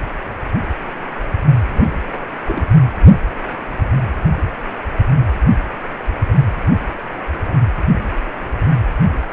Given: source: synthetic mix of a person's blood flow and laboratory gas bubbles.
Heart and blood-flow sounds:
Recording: Doppler ultrasound of blood flow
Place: precordium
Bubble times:
1.67-2.00 s: bubbles
2.08-2.26 s: bubbles
2.47-2.69 s: bubbles
From the record:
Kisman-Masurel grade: 211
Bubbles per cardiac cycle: several, 3 to 8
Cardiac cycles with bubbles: 1 to 10%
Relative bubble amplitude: barely perceptible (0.100 to 0.250)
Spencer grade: 1 (occasional bubble signal discernible with the cardiac motion signal, with majority of cardiac periods free of bubbles)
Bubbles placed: anywhere in the cardiac cycle

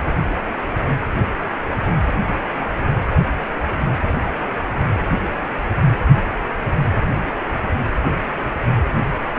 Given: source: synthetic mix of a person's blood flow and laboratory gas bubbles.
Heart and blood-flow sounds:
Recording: Doppler ultrasound of blood flow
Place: precordium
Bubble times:
no bubbles
From the record:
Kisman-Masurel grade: 000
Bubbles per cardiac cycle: 0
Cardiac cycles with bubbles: 0%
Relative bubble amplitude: no bubbles discernible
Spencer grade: 0 (complete lack of bubble signals)

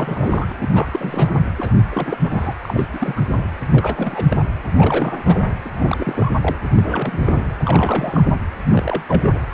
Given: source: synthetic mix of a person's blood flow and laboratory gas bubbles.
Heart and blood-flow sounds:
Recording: Doppler ultrasound of blood flow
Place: precordium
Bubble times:
0.00-0.52 s: bubbles
0.60-0.69 s: bubbles
0.74-1.36 s: bubbles
1.56-1.74 s: bubbles
1.92-2.17 s: bubbles
2.23-2.54 s: bubbles
2.61-2.86 s: bubbles
2.92-3.21 s: bubbles
3.25-3.46 s: bubbles
3.67-4.25 s: bubbles
4.30-4.44 s: bubbles
4.77-5.56 s: bubbles
5.65-5.71 s: bubbles
5.73-6.31 s: bubbles
6.41-6.56 s: bubbles
6.76-7.52 s: bubbles
7.57-8.39 s: bubbles
8.71-9.03 s: bubbles
9.08-9.42 s: bubbles
From the record:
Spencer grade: 3 (all of the cardiac periods contain showers or single bubble signals, but not dominating or overriding the cardiac motion signals)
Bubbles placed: anywhere in the cardiac cycle

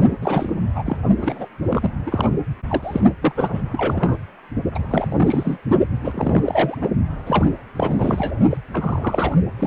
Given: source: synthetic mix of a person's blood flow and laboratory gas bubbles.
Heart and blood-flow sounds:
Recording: Doppler ultrasound of blood flow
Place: precordium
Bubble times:
0.22-0.53 s: bubbles
0.74-0.83 s: bubbles
0.86-0.97 s: bubbles
1.21-1.46 s: bubbles
1.69-1.91 s: bubbles
2.06-2.29 s: bubbles
2.68-3.01 s: bubbles
3.22-3.33 s: bubbles
3.36-3.62 s: bubbles
3.71-4.16 s: bubbles
4.75-5.58 s: bubbles
6.04-6.78 s: bubbles
6.81-6.88 s: bubbles
7.26-7.45 s: bubbles
7.76-8.34 s: bubbles
8.50-8.57 s: bubbles
8.73-9.37 s: bubbles
9.59-9.67 s: bubbles
From the record:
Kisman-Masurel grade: 342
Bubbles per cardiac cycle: rolling drumbeat, 9 or more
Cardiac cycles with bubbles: 100%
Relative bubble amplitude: moderate (0.250 to 0.450)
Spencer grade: 3 (all of the cardiac periods contain showers or single bubble signals, but not dominating or overriding the cardiac motion signals)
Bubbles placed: only in the low amplitude regions of the cardiac cycle

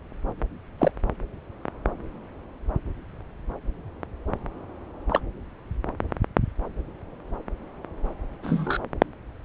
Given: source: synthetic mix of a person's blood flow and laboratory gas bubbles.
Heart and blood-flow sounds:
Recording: Doppler ultrasound of blood flow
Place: subclavian vein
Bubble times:
0.78-0.92 s: bubbles
5.10-5.20 s: bubbles
8.43-8.79 s: bubbles
From the record:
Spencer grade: 2 (many but less than half of the cardiac periods contain bubble signals, singularly or in groups)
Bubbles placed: anywhere in the cardiac cycle

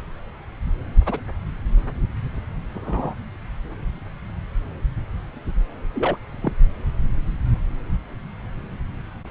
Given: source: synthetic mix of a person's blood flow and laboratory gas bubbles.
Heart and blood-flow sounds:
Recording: Doppler ultrasound of blood flow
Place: subclavian vein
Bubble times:
1.06-1.21 s: bubbles
2.74-3.15 s: bubbles
5.95-6.17 s: bubbles
6.41-6.53 s: bubbles
From the record:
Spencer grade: 2 (many but less than half of the cardiac periods contain bubble signals, singularly or in groups)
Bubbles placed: anywhere in the cardiac cycle

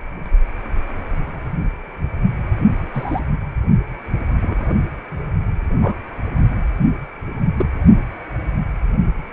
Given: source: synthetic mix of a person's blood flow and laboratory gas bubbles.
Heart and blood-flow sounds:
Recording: Doppler ultrasound of blood flow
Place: precordium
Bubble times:
2.94-3.21 s: bubbles
4.40-4.74 s: bubbles
5.81-5.95 s: bubbles
7.56-7.65 s: bubbles
From the record:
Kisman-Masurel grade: 122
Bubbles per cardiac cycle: 1 to 2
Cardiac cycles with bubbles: 10 to 50%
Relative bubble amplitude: moderate (0.250 to 0.450)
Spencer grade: 2 (many but less than half of the cardiac periods contain bubble signals, singularly or in groups)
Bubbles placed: only in the low amplitude regions of the cardiac cycle

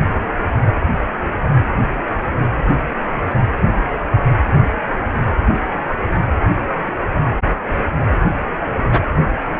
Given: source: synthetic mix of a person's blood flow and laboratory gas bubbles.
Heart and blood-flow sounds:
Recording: Doppler ultrasound of blood flow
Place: precordium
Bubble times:
no bubbles
From the record:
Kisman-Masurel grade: 000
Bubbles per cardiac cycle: 0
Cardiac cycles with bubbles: 0%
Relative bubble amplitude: no bubbles discernible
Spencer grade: 0 (complete lack of bubble signals)

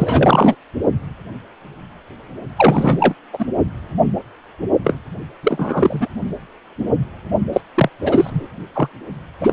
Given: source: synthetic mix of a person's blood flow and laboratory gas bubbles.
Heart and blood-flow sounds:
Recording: Doppler ultrasound of blood flow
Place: precordium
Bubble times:
0.00-0.55 s: bubbles
2.56-3.14 s: bubbles
3.33-3.46 s: bubbles
4.83-4.99 s: bubbles
5.43-6.07 s: bubbles
7.52-7.61 s: bubbles
7.74-7.89 s: bubbles
8.00-8.47 s: bubbles
8.74-8.88 s: bubbles
9.41-9.53 s: bubbles
From the record:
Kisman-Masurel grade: 233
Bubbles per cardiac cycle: several, 3 to 8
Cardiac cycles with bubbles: 50 to 99%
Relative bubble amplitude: loud (0.450 to 0.775)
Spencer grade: 3 (all of the cardiac periods contain showers or single bubble signals, but not dominating or overriding the cardiac motion signals)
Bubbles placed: only in the low amplitude regions of the cardiac cycle

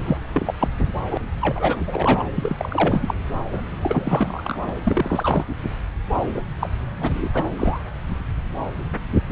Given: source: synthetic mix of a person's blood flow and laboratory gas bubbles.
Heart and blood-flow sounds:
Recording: Doppler ultrasound of blood flow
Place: subclavian vein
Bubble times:
0.05-0.18 s: bubbles
0.34-0.54 s: bubbles
0.59-0.68 s: bubbles
0.80-0.88 s: bubbles
1.10-1.17 s: bubbles
1.41-1.81 s: bubbles
1.87-2.27 s: bubbles
2.35-3.15 s: bubbles
3.51-3.65 s: bubbles
3.83-4.59 s: bubbles
4.67-4.70 s: bubbles
4.84-5.46 s: bubbles
6.19-6.28 s: bubbles
6.33-6.42 s: bubbles
6.59-6.69 s: bubbles
6.98-7.29 s: bubbles
7.33-7.45 s: bubbles
7.58-7.79 s: bubbles
From the record:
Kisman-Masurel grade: 333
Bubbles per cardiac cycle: rolling drumbeat, 9 or more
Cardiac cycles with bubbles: 50 to 99%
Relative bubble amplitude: loud (0.450 to 0.775)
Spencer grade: 3 (all of the cardiac periods contain showers or single bubble signals, but not dominating or overriding the cardiac motion signals)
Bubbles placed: anywhere in the cardiac cycle

